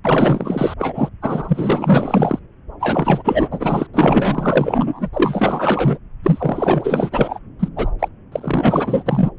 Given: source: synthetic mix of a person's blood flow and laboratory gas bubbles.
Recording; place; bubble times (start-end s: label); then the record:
Doppler ultrasound of blood flow; subclavian vein
0.04-0.74 s: bubbles
0.79-1.09 s: bubbles
1.21-2.39 s: bubbles
2.80-3.48 s: bubbles
3.51-3.87 s: bubbles
3.94-5.08 s: bubbles
5.13-5.98 s: bubbles
6.23-7.39 s: bubbles
7.59-7.69 s: bubbles
7.76-7.90 s: bubbles
7.99-8.08 s: bubbles
8.32-9.03 s: bubbles
9.06-9.30 s: bubbles
From the record:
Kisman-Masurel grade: 444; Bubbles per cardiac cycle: continuous sound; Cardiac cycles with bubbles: 100%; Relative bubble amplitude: maximal (0.775 to 0.999); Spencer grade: 4 (maximum detectable bubble signal sounding continuously throughout systole and diastole of every cardiac period, and overriding the amplitude of the normal cardiac signals); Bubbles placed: anywhere in the cardiac cycle